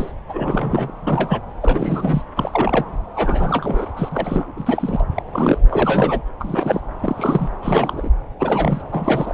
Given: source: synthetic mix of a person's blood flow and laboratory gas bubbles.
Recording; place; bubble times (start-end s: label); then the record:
Doppler ultrasound of blood flow; subclavian vein
0.00-0.12 s: bubbles
0.29-0.91 s: bubbles
1.06-1.41 s: bubbles
1.62-2.23 s: bubbles
2.37-2.87 s: bubbles
3.15-3.86 s: bubbles
3.96-4.52 s: bubbles
4.56-5.05 s: bubbles
5.16-5.22 s: bubbles
5.32-5.58 s: bubbles
5.69-6.21 s: bubbles
6.39-6.80 s: bubbles
7.03-7.49 s: bubbles
7.62-8.11 s: bubbles
8.39-8.81 s: bubbles
8.92-9.33 s: bubbles
From the record:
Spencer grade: 3 (all of the cardiac periods contain showers or single bubble signals, but not dominating or overriding the cardiac motion signals); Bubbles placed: anywhere in the cardiac cycle